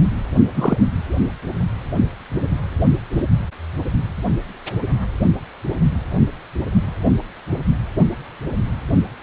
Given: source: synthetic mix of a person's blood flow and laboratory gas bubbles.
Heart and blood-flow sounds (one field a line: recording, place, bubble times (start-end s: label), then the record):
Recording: Doppler ultrasound of blood flow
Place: precordium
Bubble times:
0.54-0.82 s: bubbles
From the record:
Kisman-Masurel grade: 113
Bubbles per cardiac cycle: 1 to 2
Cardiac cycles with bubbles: 1 to 10%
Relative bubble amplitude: loud (0.450 to 0.775)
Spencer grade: 1 (occasional bubble signal discernible with the cardiac motion signal, with majority of cardiac periods free of bubbles)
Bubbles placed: only in the low amplitude regions of the cardiac cycle